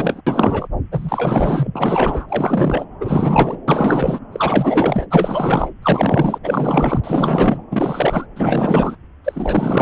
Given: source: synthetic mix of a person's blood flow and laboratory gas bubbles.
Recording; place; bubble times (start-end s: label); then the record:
Doppler ultrasound of blood flow; subclavian vein
0.00-0.21 s: bubbles
0.27-0.68 s: bubbles
0.91-1.70 s: bubbles
1.75-2.26 s: bubbles
2.28-2.85 s: bubbles
3.00-3.58 s: bubbles
3.67-4.19 s: bubbles
4.32-5.06 s: bubbles
5.11-5.71 s: bubbles
5.82-6.39 s: bubbles
6.43-7.00 s: bubbles
7.04-7.62 s: bubbles
7.71-8.27 s: bubbles
8.36-8.96 s: bubbles
9.24-9.82 s: bubbles
From the record:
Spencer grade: 4 (maximum detectable bubble signal sounding continuously throughout systole and diastole of every cardiac period, and overriding the amplitude of the normal cardiac signals); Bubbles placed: anywhere in the cardiac cycle